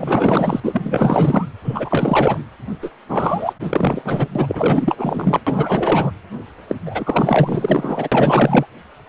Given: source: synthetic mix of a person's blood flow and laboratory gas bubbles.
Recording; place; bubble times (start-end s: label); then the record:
Doppler ultrasound of blood flow; precordium
0.00-0.60 s: bubbles
0.63-1.49 s: bubbles
1.64-2.38 s: bubbles
2.82-2.92 s: bubbles
3.08-3.53 s: bubbles
3.60-4.28 s: bubbles
4.35-5.40 s: bubbles
5.46-6.11 s: bubbles
6.67-6.76 s: bubbles
6.85-8.09 s: bubbles
8.12-8.66 s: bubbles
From the record:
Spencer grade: 4 (maximum detectable bubble signal sounding continuously throughout systole and diastole of every cardiac period, and overriding the amplitude of the normal cardiac signals); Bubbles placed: anywhere in the cardiac cycle